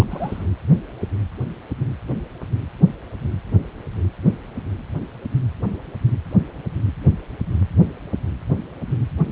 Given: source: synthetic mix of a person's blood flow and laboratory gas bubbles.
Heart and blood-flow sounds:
Doppler ultrasound of blood flow; precordium
0.00-0.44 s: bubbles
From the record:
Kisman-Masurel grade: 211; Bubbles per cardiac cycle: several, 3 to 8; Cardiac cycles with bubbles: 1 to 10%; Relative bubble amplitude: barely perceptible (0.100 to 0.250); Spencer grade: 1 (occasional bubble signal discernible with the cardiac motion signal, with majority of cardiac periods free of bubbles); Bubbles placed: anywhere in the cardiac cycle

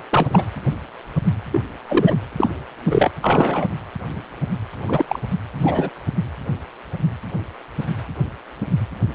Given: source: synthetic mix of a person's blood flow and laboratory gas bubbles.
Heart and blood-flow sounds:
Doppler ultrasound of blood flow; precordium
0.00-0.02 s: bubbles
0.10-0.46 s: bubbles
1.52-1.60 s: bubbles
1.85-2.19 s: bubbles
2.36-2.50 s: bubbles
2.90-3.11 s: bubbles
3.21-3.68 s: bubbles
4.88-5.05 s: bubbles
5.08-5.20 s: bubbles
5.58-5.89 s: bubbles
From the record:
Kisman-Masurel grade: 233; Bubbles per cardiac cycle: several, 3 to 8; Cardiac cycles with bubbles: 50 to 99%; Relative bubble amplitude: loud (0.450 to 0.775); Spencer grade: 3 (all of the cardiac periods contain showers or single bubble signals, but not dominating or overriding the cardiac motion signals); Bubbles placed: anywhere in the cardiac cycle

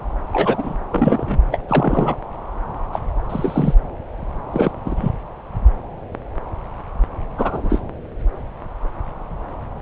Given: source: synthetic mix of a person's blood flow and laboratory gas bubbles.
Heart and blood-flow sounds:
Doppler ultrasound of blood flow; subclavian vein
0.31-0.74 s: bubbles
0.91-1.43 s: bubbles
1.51-1.58 s: bubbles
1.68-2.16 s: bubbles
2.93-2.99 s: bubbles
3.29-3.75 s: bubbles
4.50-4.71 s: bubbles
4.85-5.12 s: bubbles
7.38-7.79 s: bubbles
From the record:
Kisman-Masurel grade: 223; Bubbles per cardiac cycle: several, 3 to 8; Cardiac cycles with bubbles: 10 to 50%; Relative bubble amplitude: loud (0.450 to 0.775); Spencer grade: 2 (many but less than half of the cardiac periods contain bubble signals, singularly or in groups); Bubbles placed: anywhere in the cardiac cycle

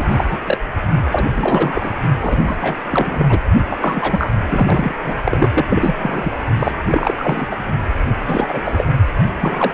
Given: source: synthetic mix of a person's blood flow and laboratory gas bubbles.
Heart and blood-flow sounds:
Doppler ultrasound of blood flow; precordium
0.00-0.24 s: bubbles
0.28-0.39 s: bubbles
0.46-0.57 s: bubbles
1.11-1.95 s: bubbles
2.21-2.57 s: bubbles
2.61-2.76 s: bubbles
2.90-3.41 s: bubbles
3.70-3.77 s: bubbles
3.81-4.36 s: bubbles
4.49-4.95 s: bubbles
5.02-5.16 s: bubbles
5.24-5.50 s: bubbles
5.54-5.66 s: bubbles
5.70-5.95 s: bubbles
5.99-6.31 s: bubbles
6.58-6.72 s: bubbles
6.90-7.14 s: bubbles
7.17-7.47 s: bubbles
7.51-7.57 s: bubbles
8.25-8.84 s: bubbles
9.40-9.71 s: bubbles
From the record:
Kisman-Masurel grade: 333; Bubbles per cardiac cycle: rolling drumbeat, 9 or more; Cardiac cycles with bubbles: 50 to 99%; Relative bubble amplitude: loud (0.450 to 0.775); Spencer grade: 3 (all of the cardiac periods contain showers or single bubble signals, but not dominating or overriding the cardiac motion signals); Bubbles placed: only in the low amplitude regions of the cardiac cycle

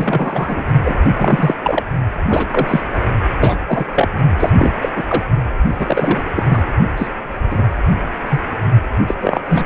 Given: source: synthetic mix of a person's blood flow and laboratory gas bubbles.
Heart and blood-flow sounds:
Doppler ultrasound of blood flow; precordium
0.00-0.65 s: bubbles
0.85-0.96 s: bubbles
1.13-1.55 s: bubbles
1.64-1.83 s: bubbles
2.28-2.81 s: bubbles
3.40-3.58 s: bubbles
3.66-3.86 s: bubbles
3.94-4.08 s: bubbles
4.39-4.50 s: bubbles
4.57-4.72 s: bubbles
4.82-4.89 s: bubbles
4.96-5.04 s: bubbles
5.08-5.23 s: bubbles
5.79-6.22 s: bubbles
6.34-6.43 s: bubbles
6.49-6.64 s: bubbles
6.97-7.08 s: bubbles
7.50-7.62 s: bubbles
8.29-8.40 s: bubbles
9.08-9.15 s: bubbles
9.22-9.40 s: bubbles
9.48-9.65 s: bubbles
From the record:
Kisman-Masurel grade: 233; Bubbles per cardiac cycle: several, 3 to 8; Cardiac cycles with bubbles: 50 to 99%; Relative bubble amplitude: loud (0.450 to 0.775); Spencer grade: 3 (all of the cardiac periods contain showers or single bubble signals, but not dominating or overriding the cardiac motion signals); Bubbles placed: only in the low amplitude regions of the cardiac cycle

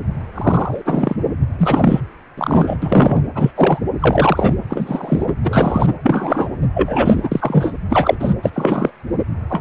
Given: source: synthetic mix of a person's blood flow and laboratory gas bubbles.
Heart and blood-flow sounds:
Doppler ultrasound of blood flow; precordium
0.00-0.03 s: bubbles
0.34-0.82 s: bubbles
0.85-1.16 s: bubbles
1.58-2.00 s: bubbles
2.38-2.77 s: bubbles
2.82-3.23 s: bubbles
3.34-3.51 s: bubbles
3.55-3.81 s: bubbles
3.99-4.54 s: bubbles
4.69-5.36 s: bubbles
5.42-5.94 s: bubbles
6.03-6.50 s: bubbles
6.74-7.29 s: bubbles
7.32-7.73 s: bubbles
7.89-8.16 s: bubbles
8.20-8.34 s: bubbles
8.43-8.50 s: bubbles
8.53-8.91 s: bubbles
9.49-9.61 s: bubbles
From the record:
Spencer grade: 3 (all of the cardiac periods contain showers or single bubble signals, but not dominating or overriding the cardiac motion signals); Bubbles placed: anywhere in the cardiac cycle

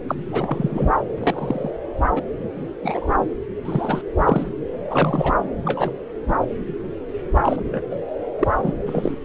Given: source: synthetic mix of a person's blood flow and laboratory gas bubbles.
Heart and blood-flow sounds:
Doppler ultrasound of blood flow; subclavian vein
0.08-0.15 s: bubbles
0.18-0.91 s: bubbles
1.17-1.71 s: bubbles
2.16-2.23 s: bubbles
2.83-3.17 s: bubbles
3.65-4.01 s: bubbles
4.17-4.47 s: bubbles
4.90-5.34 s: bubbles
5.65-5.91 s: bubbles
6.28-6.33 s: bubbles
7.32-7.81 s: bubbles
7.90-7.96 s: bubbles
8.39-8.48 s: bubbles
8.63-8.73 s: bubbles
8.86-9.15 s: bubbles
From the record:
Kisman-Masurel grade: 242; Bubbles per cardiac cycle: several, 3 to 8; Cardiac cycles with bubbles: 100%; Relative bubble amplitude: moderate (0.250 to 0.450); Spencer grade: 3 (all of the cardiac periods contain showers or single bubble signals, but not dominating or overriding the cardiac motion signals); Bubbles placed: anywhere in the cardiac cycle

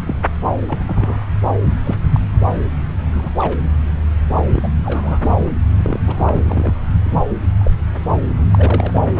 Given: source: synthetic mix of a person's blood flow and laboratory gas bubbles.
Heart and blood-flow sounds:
Doppler ultrasound of blood flow; subclavian vein
0.06-0.15 s: bubbles
0.68-0.79 s: bubbles
0.87-1.26 s: bubbles
1.85-1.96 s: bubbles
2.12-2.20 s: bubbles
3.16-3.30 s: bubbles
3.38-3.56 s: bubbles
4.45-4.68 s: bubbles
4.83-5.48 s: bubbles
5.77-6.00 s: bubbles
6.06-6.74 s: bubbles
7.05-7.24 s: bubbles
7.59-7.71 s: bubbles
8.22-8.36 s: bubbles
8.51-9.05 s: bubbles
From the record:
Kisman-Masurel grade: 232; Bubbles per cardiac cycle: several, 3 to 8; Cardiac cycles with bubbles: 50 to 99%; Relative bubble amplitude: moderate (0.250 to 0.450); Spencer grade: 3 (all of the cardiac periods contain showers or single bubble signals, but not dominating or overriding the cardiac motion signals); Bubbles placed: anywhere in the cardiac cycle

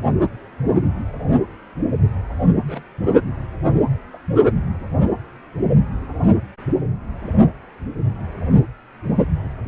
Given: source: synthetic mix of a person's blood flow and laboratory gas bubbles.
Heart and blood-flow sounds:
Doppler ultrasound of blood flow; precordium
2.55-2.62 s: bubbles
2.66-2.83 s: bubbles
3.03-3.09 s: bubbles
4.13-4.17 s: bubbles
From the record:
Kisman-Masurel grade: 121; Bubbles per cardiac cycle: 1 to 2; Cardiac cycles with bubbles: 10 to 50%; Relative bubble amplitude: barely perceptible (0.100 to 0.250); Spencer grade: 2 (many but less than half of the cardiac periods contain bubble signals, singularly or in groups); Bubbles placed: only in the low amplitude regions of the cardiac cycle

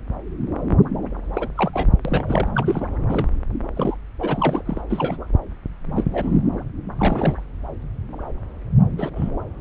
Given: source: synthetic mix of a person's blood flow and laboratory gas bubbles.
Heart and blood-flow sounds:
Doppler ultrasound of blood flow; subclavian vein
1.33-1.47 s: bubbles
1.55-1.90 s: bubbles
2.04-2.48 s: bubbles
2.55-2.88 s: bubbles
3.08-3.28 s: bubbles
3.76-3.96 s: bubbles
4.20-4.62 s: bubbles
4.65-4.81 s: bubbles
4.90-5.17 s: bubbles
5.95-6.04 s: bubbles
6.13-6.37 s: bubbles
6.98-7.42 s: bubbles
8.98-9.10 s: bubbles
9.16-9.30 s: bubbles
From the record:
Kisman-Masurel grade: 232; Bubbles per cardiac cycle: several, 3 to 8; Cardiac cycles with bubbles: 50 to 99%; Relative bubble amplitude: moderate (0.250 to 0.450); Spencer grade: 3 (all of the cardiac periods contain showers or single bubble signals, but not dominating or overriding the cardiac motion signals); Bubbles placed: anywhere in the cardiac cycle

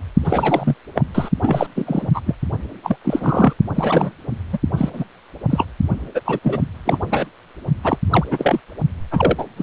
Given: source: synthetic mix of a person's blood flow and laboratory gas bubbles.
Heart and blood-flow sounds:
Doppler ultrasound of blood flow; precordium
0.24-0.74 s: bubbles
0.95-1.05 s: bubbles
1.15-1.29 s: bubbles
1.42-1.68 s: bubbles
1.75-2.08 s: bubbles
2.14-2.21 s: bubbles
2.26-2.35 s: bubbles
2.83-2.96 s: bubbles
3.04-3.54 s: bubbles
3.75-4.10 s: bubbles
4.53-4.58 s: bubbles
4.77-4.90 s: bubbles
4.93-5.04 s: bubbles
5.50-5.67 s: bubbles
6.14-6.21 s: bubbles
6.25-6.39 s: bubbles
6.42-6.60 s: bubbles
6.85-6.99 s: bubbles
7.10-7.28 s: bubbles
7.83-7.98 s: bubbles
8.10-8.24 s: bubbles
8.31-8.60 s: bubbles
9.11-9.45 s: bubbles
9.56-9.63 s: bubbles
From the record:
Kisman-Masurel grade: 343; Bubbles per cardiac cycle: rolling drumbeat, 9 or more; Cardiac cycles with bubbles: 100%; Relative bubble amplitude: loud (0.450 to 0.775); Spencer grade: 3 (all of the cardiac periods contain showers or single bubble signals, but not dominating or overriding the cardiac motion signals); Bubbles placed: only in the low amplitude regions of the cardiac cycle

